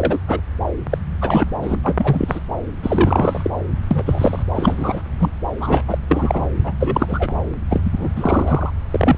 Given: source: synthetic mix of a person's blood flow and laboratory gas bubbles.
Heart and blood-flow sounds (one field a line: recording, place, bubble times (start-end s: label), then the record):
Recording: Doppler ultrasound of blood flow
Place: subclavian vein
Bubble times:
0.00-0.20 s: bubbles
0.28-0.41 s: bubbles
0.90-0.98 s: bubbles
1.21-1.45 s: bubbles
1.62-1.75 s: bubbles
1.83-2.40 s: bubbles
2.82-3.50 s: bubbles
3.91-4.43 s: bubbles
4.54-5.02 s: bubbles
5.19-5.31 s: bubbles
5.59-5.84 s: bubbles
5.88-5.98 s: bubbles
6.09-6.45 s: bubbles
6.63-6.74 s: bubbles
6.80-7.32 s: bubbles
7.70-8.10 s: bubbles
8.15-8.71 s: bubbles
8.90-9.18 s: bubbles
From the record:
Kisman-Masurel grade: 343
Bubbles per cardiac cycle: rolling drumbeat, 9 or more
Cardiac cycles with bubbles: 100%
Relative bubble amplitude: loud (0.450 to 0.775)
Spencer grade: 3 (all of the cardiac periods contain showers or single bubble signals, but not dominating or overriding the cardiac motion signals)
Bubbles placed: anywhere in the cardiac cycle